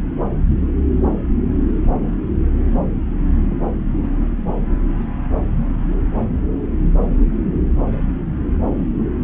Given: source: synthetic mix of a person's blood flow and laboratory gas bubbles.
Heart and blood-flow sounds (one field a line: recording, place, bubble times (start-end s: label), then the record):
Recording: Doppler ultrasound of blood flow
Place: subclavian vein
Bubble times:
3.50-3.55 s: bubbles
3.97-4.17 s: bubbles
From the record:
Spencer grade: 2 (many but less than half of the cardiac periods contain bubble signals, singularly or in groups)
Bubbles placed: anywhere in the cardiac cycle